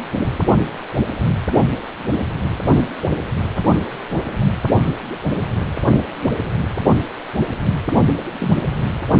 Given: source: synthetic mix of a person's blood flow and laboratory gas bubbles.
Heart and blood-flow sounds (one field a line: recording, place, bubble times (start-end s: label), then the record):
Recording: Doppler ultrasound of blood flow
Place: precordium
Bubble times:
8.39-8.57 s: bubbles
From the record:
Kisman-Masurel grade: 112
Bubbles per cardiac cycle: 1 to 2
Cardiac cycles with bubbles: 1 to 10%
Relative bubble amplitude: moderate (0.250 to 0.450)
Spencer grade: 1 (occasional bubble signal discernible with the cardiac motion signal, with majority of cardiac periods free of bubbles)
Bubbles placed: anywhere in the cardiac cycle